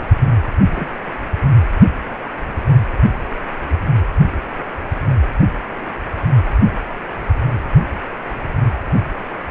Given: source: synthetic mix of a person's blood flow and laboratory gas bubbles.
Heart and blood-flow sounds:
Doppler ultrasound of blood flow; precordium
0.75-0.89 s: bubbles
From the record:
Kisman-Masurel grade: 112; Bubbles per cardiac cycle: 1 to 2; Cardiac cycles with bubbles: 1 to 10%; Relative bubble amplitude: moderate (0.250 to 0.450); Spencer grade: 1 (occasional bubble signal discernible with the cardiac motion signal, with majority of cardiac periods free of bubbles); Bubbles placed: anywhere in the cardiac cycle

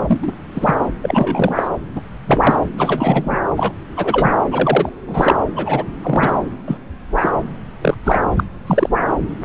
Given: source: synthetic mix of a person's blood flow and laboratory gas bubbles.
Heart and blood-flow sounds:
Doppler ultrasound of blood flow; subclavian vein
0.09-0.32 s: bubbles
0.54-0.74 s: bubbles
1.01-1.68 s: bubbles
1.95-2.01 s: bubbles
2.26-2.57 s: bubbles
2.77-3.38 s: bubbles
3.56-3.73 s: bubbles
3.97-4.33 s: bubbles
4.51-4.89 s: bubbles
5.07-5.38 s: bubbles
5.55-5.85 s: bubbles
6.00-6.42 s: bubbles
6.67-6.77 s: bubbles
7.15-7.29 s: bubbles
7.81-7.95 s: bubbles
8.04-8.21 s: bubbles
8.36-8.44 s: bubbles
8.66-8.89 s: bubbles
From the record:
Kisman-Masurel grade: 243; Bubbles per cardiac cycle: several, 3 to 8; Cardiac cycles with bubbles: 100%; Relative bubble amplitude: loud (0.450 to 0.775); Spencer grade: 3 (all of the cardiac periods contain showers or single bubble signals, but not dominating or overriding the cardiac motion signals); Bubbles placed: anywhere in the cardiac cycle

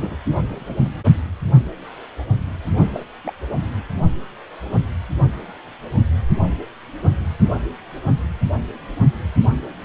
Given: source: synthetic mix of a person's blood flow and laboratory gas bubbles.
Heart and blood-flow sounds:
Doppler ultrasound of blood flow; precordium
0.00-0.17 s: bubbles
0.49-0.76 s: bubbles
0.79-0.92 s: bubbles
2.93-3.04 s: bubbles
3.24-3.33 s: bubbles
From the record:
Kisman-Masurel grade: 221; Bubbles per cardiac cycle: several, 3 to 8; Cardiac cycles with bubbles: 10 to 50%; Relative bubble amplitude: barely perceptible (0.100 to 0.250); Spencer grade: 2 (many but less than half of the cardiac periods contain bubble signals, singularly or in groups); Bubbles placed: anywhere in the cardiac cycle

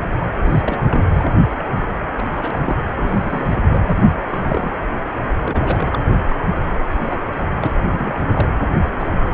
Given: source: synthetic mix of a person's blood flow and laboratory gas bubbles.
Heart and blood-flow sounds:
Doppler ultrasound of blood flow; precordium
0.45-1.30 s: bubbles
1.58-1.64 s: bubbles
2.16-2.76 s: bubbles
3.01-3.60 s: bubbles
3.67-3.81 s: bubbles
3.87-3.99 s: bubbles
4.29-4.72 s: bubbles
5.44-5.87 s: bubbles
5.92-6.02 s: bubbles
6.12-6.23 s: bubbles
6.29-6.38 s: bubbles
6.96-7.20 s: bubbles
7.41-7.75 s: bubbles
7.91-8.49 s: bubbles
8.99-9.10 s: bubbles
9.31-9.34 s: bubbles
From the record:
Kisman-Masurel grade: 242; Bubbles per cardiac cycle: several, 3 to 8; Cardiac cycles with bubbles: 100%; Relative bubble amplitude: moderate (0.250 to 0.450); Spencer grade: 3 (all of the cardiac periods contain showers or single bubble signals, but not dominating or overriding the cardiac motion signals); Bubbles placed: anywhere in the cardiac cycle

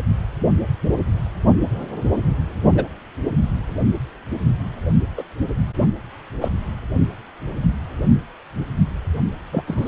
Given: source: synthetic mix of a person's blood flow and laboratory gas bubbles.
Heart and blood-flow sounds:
Doppler ultrasound of blood flow; precordium
2.74-2.84 s: bubbles
5.17-5.23 s: bubbles
6.41-6.49 s: bubbles
9.52-9.64 s: bubbles
9.67-9.88 s: bubbles
From the record:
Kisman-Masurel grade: 122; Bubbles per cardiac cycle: 1 to 2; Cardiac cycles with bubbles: 10 to 50%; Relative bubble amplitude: moderate (0.250 to 0.450); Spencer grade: 2 (many but less than half of the cardiac periods contain bubble signals, singularly or in groups); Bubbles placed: only in the low amplitude regions of the cardiac cycle

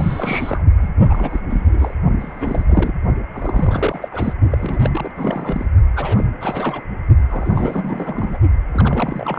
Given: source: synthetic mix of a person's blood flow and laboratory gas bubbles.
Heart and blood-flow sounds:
Doppler ultrasound of blood flow; precordium
0.00-0.63 s: bubbles
0.80-0.90 s: bubbles
1.00-1.42 s: bubbles
1.50-1.94 s: bubbles
2.19-2.92 s: bubbles
3.33-4.09 s: bubbles
4.11-4.34 s: bubbles
4.51-5.11 s: bubbles
5.15-5.66 s: bubbles
5.96-6.24 s: bubbles
6.40-6.83 s: bubbles
7.29-8.38 s: bubbles
8.71-9.39 s: bubbles
From the record:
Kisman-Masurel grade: 342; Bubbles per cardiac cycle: rolling drumbeat, 9 or more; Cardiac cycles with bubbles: 100%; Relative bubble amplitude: moderate (0.250 to 0.450); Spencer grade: 3 (all of the cardiac periods contain showers or single bubble signals, but not dominating or overriding the cardiac motion signals); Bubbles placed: only in the low amplitude regions of the cardiac cycle

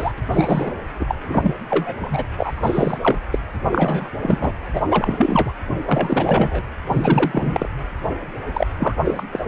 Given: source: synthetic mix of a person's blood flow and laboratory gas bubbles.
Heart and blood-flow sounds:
Doppler ultrasound of blood flow; precordium
0.00-0.13 s: bubbles
0.17-0.22 s: bubbles
0.32-0.74 s: bubbles
0.99-1.16 s: bubbles
1.23-1.55 s: bubbles
1.70-2.25 s: bubbles
2.38-2.98 s: bubbles
3.01-3.18 s: bubbles
3.31-3.39 s: bubbles
3.56-3.58 s: bubbles
3.71-4.07 s: bubbles
4.22-4.53 s: bubbles
4.73-4.83 s: bubbles
4.90-5.53 s: bubbles
5.86-6.62 s: bubbles
6.88-7.69 s: bubbles
8.54-8.67 s: bubbles
8.78-8.95 s: bubbles
9.04-9.23 s: bubbles
9.31-9.39 s: bubbles
9.45-9.48 s: bubbles
From the record:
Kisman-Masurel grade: 343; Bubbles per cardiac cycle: rolling drumbeat, 9 or more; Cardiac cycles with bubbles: 100%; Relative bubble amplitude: loud (0.450 to 0.775); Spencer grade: 3 (all of the cardiac periods contain showers or single bubble signals, but not dominating or overriding the cardiac motion signals); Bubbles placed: anywhere in the cardiac cycle

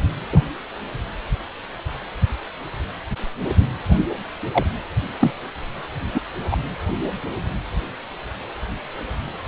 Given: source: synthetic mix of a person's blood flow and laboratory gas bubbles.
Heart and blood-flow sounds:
Doppler ultrasound of blood flow; precordium
0.32-0.41 s: bubbles
4.52-4.65 s: bubbles
5.20-5.33 s: bubbles
6.14-6.20 s: bubbles
6.51-6.57 s: bubbles
From the record:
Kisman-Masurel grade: 123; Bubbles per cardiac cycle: 1 to 2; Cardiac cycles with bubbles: 10 to 50%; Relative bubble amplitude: loud (0.450 to 0.775); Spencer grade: 2 (many but less than half of the cardiac periods contain bubble signals, singularly or in groups); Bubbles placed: anywhere in the cardiac cycle

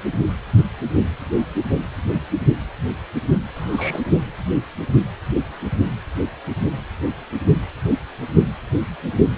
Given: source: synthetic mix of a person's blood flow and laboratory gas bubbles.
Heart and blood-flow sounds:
Doppler ultrasound of blood flow; precordium
3.56-4.07 s: bubbles
From the record:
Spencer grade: 1 (occasional bubble signal discernible with the cardiac motion signal, with majority of cardiac periods free of bubbles); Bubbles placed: only in the low amplitude regions of the cardiac cycle

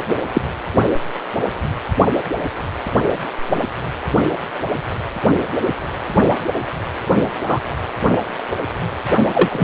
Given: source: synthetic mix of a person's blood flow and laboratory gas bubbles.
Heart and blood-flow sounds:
Doppler ultrasound of blood flow; precordium
0.09-0.14 s: bubbles
0.34-0.41 s: bubbles
7.43-7.74 s: bubbles
9.33-9.64 s: bubbles
From the record:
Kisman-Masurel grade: 123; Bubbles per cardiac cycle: 1 to 2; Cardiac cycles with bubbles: 10 to 50%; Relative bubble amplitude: loud (0.450 to 0.775); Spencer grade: 2 (many but less than half of the cardiac periods contain bubble signals, singularly or in groups); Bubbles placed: only in the low amplitude regions of the cardiac cycle

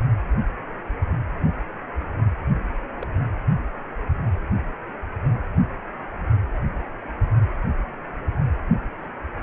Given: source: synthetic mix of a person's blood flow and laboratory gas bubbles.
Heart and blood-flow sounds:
Doppler ultrasound of blood flow; precordium
3.01-3.08 s: bubbles
From the record:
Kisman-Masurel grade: 111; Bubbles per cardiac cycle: 1 to 2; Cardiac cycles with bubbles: 1 to 10%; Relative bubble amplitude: barely perceptible (0.100 to 0.250); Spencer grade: 1 (occasional bubble signal discernible with the cardiac motion signal, with majority of cardiac periods free of bubbles); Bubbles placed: anywhere in the cardiac cycle

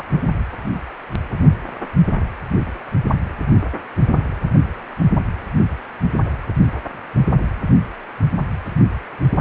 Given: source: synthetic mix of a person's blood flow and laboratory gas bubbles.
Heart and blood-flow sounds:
Doppler ultrasound of blood flow; precordium
0.00-0.03 s: bubbles
From the record:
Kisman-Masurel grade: 113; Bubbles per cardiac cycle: 1 to 2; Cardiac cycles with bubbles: 1 to 10%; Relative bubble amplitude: loud (0.450 to 0.775); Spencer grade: 1 (occasional bubble signal discernible with the cardiac motion signal, with majority of cardiac periods free of bubbles); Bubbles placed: anywhere in the cardiac cycle

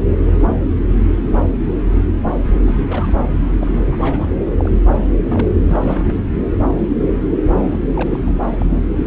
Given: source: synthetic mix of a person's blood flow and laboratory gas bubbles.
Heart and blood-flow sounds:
Doppler ultrasound of blood flow; subclavian vein
2.65-3.15 s: bubbles
3.60-3.83 s: bubbles
3.92-4.28 s: bubbles
4.57-4.76 s: bubbles
5.23-5.47 s: bubbles
5.66-6.13 s: bubbles
7.56-7.82 s: bubbles
7.89-8.31 s: bubbles
8.58-8.66 s: bubbles
From the record:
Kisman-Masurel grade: 221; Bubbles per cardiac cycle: several, 3 to 8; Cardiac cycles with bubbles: 10 to 50%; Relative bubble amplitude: barely perceptible (0.100 to 0.250); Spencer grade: 2 (many but less than half of the cardiac periods contain bubble signals, singularly or in groups); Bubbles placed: anywhere in the cardiac cycle

